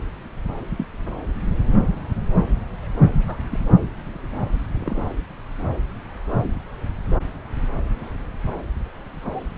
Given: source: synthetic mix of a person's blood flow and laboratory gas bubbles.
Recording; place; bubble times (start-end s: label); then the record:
Doppler ultrasound of blood flow; subclavian vein
0.77-0.86 s: bubbles
3.18-3.60 s: bubbles
4.74-5.06 s: bubbles
9.21-9.51 s: bubbles
From the record:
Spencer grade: 2 (many but less than half of the cardiac periods contain bubble signals, singularly or in groups); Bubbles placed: anywhere in the cardiac cycle